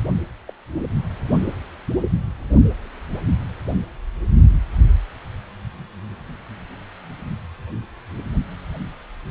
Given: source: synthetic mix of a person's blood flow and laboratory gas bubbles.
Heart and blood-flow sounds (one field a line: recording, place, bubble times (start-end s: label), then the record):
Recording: Doppler ultrasound of blood flow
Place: precordium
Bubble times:
0.48-0.53 s: bubbles
From the record:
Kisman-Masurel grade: 111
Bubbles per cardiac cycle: 1 to 2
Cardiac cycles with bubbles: 1 to 10%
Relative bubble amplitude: barely perceptible (0.100 to 0.250)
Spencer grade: 1 (occasional bubble signal discernible with the cardiac motion signal, with majority of cardiac periods free of bubbles)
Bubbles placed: anywhere in the cardiac cycle